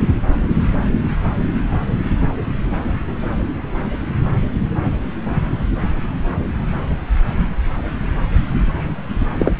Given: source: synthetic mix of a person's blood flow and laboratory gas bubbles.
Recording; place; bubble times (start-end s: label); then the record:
Doppler ultrasound of blood flow; subclavian vein
9.39-9.53 s: bubbles
From the record:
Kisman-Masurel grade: 113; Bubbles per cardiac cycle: 1 to 2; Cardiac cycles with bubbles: 1 to 10%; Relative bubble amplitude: loud (0.450 to 0.775); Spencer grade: 1 (occasional bubble signal discernible with the cardiac motion signal, with majority of cardiac periods free of bubbles); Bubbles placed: anywhere in the cardiac cycle